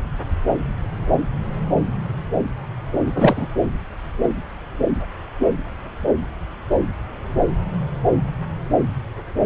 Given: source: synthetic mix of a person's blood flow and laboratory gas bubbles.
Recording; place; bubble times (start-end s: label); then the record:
Doppler ultrasound of blood flow; subclavian vein
3.06-3.46 s: bubbles
From the record:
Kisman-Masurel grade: 213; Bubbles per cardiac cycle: several, 3 to 8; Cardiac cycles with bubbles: 1 to 10%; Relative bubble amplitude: loud (0.450 to 0.775); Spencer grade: 1 (occasional bubble signal discernible with the cardiac motion signal, with majority of cardiac periods free of bubbles); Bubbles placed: anywhere in the cardiac cycle